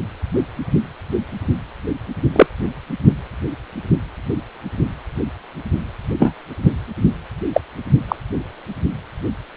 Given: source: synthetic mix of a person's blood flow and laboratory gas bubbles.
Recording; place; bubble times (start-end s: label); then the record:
Doppler ultrasound of blood flow; precordium
2.33-2.47 s: bubbles
6.19-6.34 s: bubbles
7.54-7.60 s: bubbles
8.08-8.15 s: bubbles
From the record:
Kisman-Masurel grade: 123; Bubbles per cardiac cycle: 1 to 2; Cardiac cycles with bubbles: 10 to 50%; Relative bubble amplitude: loud (0.450 to 0.775); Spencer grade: 2 (many but less than half of the cardiac periods contain bubble signals, singularly or in groups); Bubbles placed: anywhere in the cardiac cycle